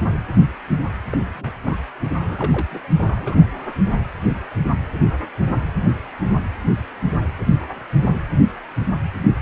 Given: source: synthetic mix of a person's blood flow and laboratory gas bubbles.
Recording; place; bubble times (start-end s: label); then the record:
Doppler ultrasound of blood flow; precordium
1.12-1.52 s: bubbles
1.63-1.78 s: bubbles
2.19-2.67 s: bubbles
2.71-2.79 s: bubbles
2.98-3.46 s: bubbles
From the record:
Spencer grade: 2 (many but less than half of the cardiac periods contain bubble signals, singularly or in groups); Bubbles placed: anywhere in the cardiac cycle